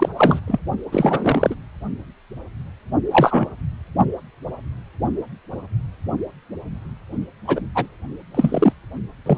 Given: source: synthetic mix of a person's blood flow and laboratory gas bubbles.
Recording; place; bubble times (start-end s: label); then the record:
Doppler ultrasound of blood flow; precordium
0.00-0.09 s: bubbles
0.16-0.40 s: bubbles
0.48-0.59 s: bubbles
0.92-1.55 s: bubbles
3.11-3.47 s: bubbles
7.47-7.61 s: bubbles
7.75-7.87 s: bubbles
8.35-8.72 s: bubbles
9.26-9.38 s: bubbles
From the record:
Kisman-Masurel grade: 233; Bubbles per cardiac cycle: several, 3 to 8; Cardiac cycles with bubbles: 50 to 99%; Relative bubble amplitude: loud (0.450 to 0.775); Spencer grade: 3 (all of the cardiac periods contain showers or single bubble signals, but not dominating or overriding the cardiac motion signals); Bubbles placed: only in the low amplitude regions of the cardiac cycle